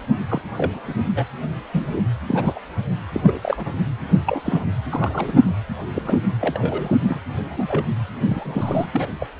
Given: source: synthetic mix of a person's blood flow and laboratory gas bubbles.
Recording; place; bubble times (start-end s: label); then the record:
Doppler ultrasound of blood flow; precordium
0.28-0.42 s: bubbles
0.57-0.94 s: bubbles
1.15-1.25 s: bubbles
1.73-2.01 s: bubbles
2.30-2.59 s: bubbles
3.12-3.73 s: bubbles
4.26-4.41 s: bubbles
4.45-4.66 s: bubbles
4.90-5.39 s: bubbles
5.92-6.37 s: bubbles
6.40-6.97 s: bubbles
7.08-7.20 s: bubbles
7.42-7.86 s: bubbles
8.28-8.87 s: bubbles
8.93-9.07 s: bubbles
9.21-9.26 s: bubbles
From the record:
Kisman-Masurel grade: 242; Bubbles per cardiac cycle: several, 3 to 8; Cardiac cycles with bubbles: 100%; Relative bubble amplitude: moderate (0.250 to 0.450); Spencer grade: 3 (all of the cardiac periods contain showers or single bubble signals, but not dominating or overriding the cardiac motion signals); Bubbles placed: anywhere in the cardiac cycle